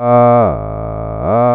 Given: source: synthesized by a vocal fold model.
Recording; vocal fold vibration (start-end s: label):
sustained vowel that changes in the middle
0.00-0.38 s: 120.4 Hz, open quotient 0.46
0.58-1.18 s: 54.2 Hz, open quotient 0.38
1.38-1.55 s: 120.4 Hz, open quotient 0.46